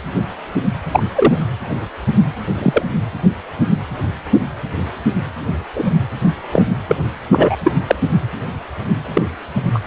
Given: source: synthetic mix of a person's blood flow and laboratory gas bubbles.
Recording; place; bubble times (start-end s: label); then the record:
Doppler ultrasound of blood flow; precordium
0.91-1.03 s: bubbles
1.15-1.36 s: bubbles
2.55-2.86 s: bubbles
5.75-5.91 s: bubbles
6.52-6.66 s: bubbles
6.87-6.96 s: bubbles
7.30-7.57 s: bubbles
7.64-7.73 s: bubbles
7.88-7.96 s: bubbles
9.13-9.23 s: bubbles
9.74-9.79 s: bubbles
From the record:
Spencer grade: 2 (many but less than half of the cardiac periods contain bubble signals, singularly or in groups); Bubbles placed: anywhere in the cardiac cycle